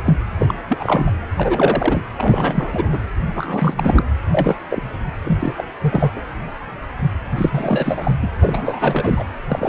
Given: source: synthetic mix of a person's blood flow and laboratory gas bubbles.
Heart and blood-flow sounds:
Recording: Doppler ultrasound of blood flow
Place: precordium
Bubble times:
0.00-0.02 s: bubbles
0.04-0.15 s: bubbles
0.38-0.55 s: bubbles
0.69-1.12 s: bubbles
1.37-2.04 s: bubbles
2.17-2.99 s: bubbles
3.35-4.04 s: bubbles
4.30-4.55 s: bubbles
4.69-4.83 s: bubbles
5.24-5.54 s: bubbles
5.57-5.64 s: bubbles
5.81-6.11 s: bubbles
6.16-6.21 s: bubbles
7.37-8.14 s: bubbles
8.21-8.29 s: bubbles
8.39-9.23 s: bubbles
9.49-9.69 s: bubbles
From the record:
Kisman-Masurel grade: 333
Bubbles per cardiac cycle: rolling drumbeat, 9 or more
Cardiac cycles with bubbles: 50 to 99%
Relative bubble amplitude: loud (0.450 to 0.775)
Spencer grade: 3 (all of the cardiac periods contain showers or single bubble signals, but not dominating or overriding the cardiac motion signals)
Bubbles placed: anywhere in the cardiac cycle

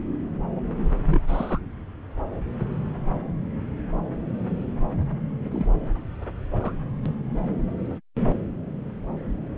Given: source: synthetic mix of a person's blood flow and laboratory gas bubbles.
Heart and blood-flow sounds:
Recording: Doppler ultrasound of blood flow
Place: subclavian vein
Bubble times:
1.04-1.20 s: bubbles
1.26-1.59 s: bubbles
5.45-5.66 s: bubbles
6.60-6.72 s: bubbles
7.05-7.15 s: bubbles
From the record:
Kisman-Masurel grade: 121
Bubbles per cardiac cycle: 1 to 2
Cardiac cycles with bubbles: 10 to 50%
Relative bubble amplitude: barely perceptible (0.100 to 0.250)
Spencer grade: 2 (many but less than half of the cardiac periods contain bubble signals, singularly or in groups)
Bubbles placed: anywhere in the cardiac cycle

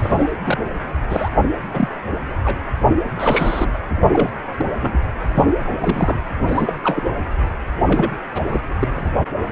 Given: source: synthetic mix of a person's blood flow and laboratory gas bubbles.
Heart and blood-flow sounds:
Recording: Doppler ultrasound of blood flow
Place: precordium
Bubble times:
0.00-0.31 s: bubbles
0.44-0.58 s: bubbles
1.10-1.28 s: bubbles
1.73-1.89 s: bubbles
2.44-2.56 s: bubbles
3.15-3.78 s: bubbles
4.12-4.29 s: bubbles
4.57-4.65 s: bubbles
4.80-5.00 s: bubbles
5.34-5.44 s: bubbles
5.81-6.21 s: bubbles
6.26-6.30 s: bubbles
6.46-6.73 s: bubbles
6.83-7.03 s: bubbles
7.87-8.11 s: bubbles
8.35-8.42 s: bubbles
8.48-8.62 s: bubbles
8.79-8.88 s: bubbles
8.96-9.11 s: bubbles
From the record:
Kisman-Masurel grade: 242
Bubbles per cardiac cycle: several, 3 to 8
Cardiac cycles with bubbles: 100%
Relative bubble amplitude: moderate (0.250 to 0.450)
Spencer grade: 3 (all of the cardiac periods contain showers or single bubble signals, but not dominating or overriding the cardiac motion signals)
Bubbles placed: anywhere in the cardiac cycle

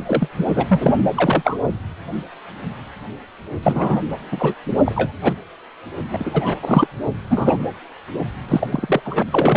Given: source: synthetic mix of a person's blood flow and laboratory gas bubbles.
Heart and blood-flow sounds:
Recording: Doppler ultrasound of blood flow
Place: precordium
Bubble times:
0.05-0.29 s: bubbles
0.38-0.46 s: bubbles
0.55-0.93 s: bubbles
1.16-1.57 s: bubbles
3.62-4.00 s: bubbles
4.31-4.54 s: bubbles
4.85-5.12 s: bubbles
5.23-5.33 s: bubbles
5.96-6.54 s: bubbles
6.62-6.88 s: bubbles
7.29-7.62 s: bubbles
8.48-9.01 s: bubbles
9.04-9.23 s: bubbles
9.31-9.57 s: bubbles
From the record:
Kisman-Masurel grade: 233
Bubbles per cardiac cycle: several, 3 to 8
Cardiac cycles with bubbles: 50 to 99%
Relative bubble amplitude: loud (0.450 to 0.775)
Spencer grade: 3 (all of the cardiac periods contain showers or single bubble signals, but not dominating or overriding the cardiac motion signals)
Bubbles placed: anywhere in the cardiac cycle

